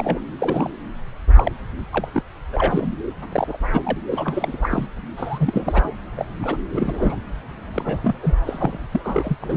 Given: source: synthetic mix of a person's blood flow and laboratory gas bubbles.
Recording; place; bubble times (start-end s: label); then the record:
Doppler ultrasound of blood flow; subclavian vein
0.00-0.20 s: bubbles
0.39-0.70 s: bubbles
1.35-1.51 s: bubbles
1.92-2.07 s: bubbles
2.13-2.23 s: bubbles
2.52-2.94 s: bubbles
3.32-3.57 s: bubbles
3.73-3.98 s: bubbles
4.11-4.86 s: bubbles
5.17-5.96 s: bubbles
6.17-6.25 s: bubbles
6.42-6.58 s: bubbles
6.75-7.16 s: bubbles
7.73-8.15 s: bubbles
8.22-8.35 s: bubbles
8.46-8.78 s: bubbles
8.91-9.01 s: bubbles
9.04-9.37 s: bubbles
9.40-9.57 s: bubbles
From the record:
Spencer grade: 3 (all of the cardiac periods contain showers or single bubble signals, but not dominating or overriding the cardiac motion signals); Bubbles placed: anywhere in the cardiac cycle